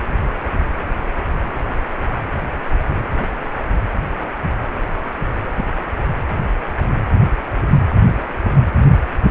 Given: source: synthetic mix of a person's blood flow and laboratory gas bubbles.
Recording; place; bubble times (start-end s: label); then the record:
Doppler ultrasound of blood flow; precordium
5.57-5.64 s: bubbles
From the record:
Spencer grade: 1 (occasional bubble signal discernible with the cardiac motion signal, with majority of cardiac periods free of bubbles); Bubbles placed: anywhere in the cardiac cycle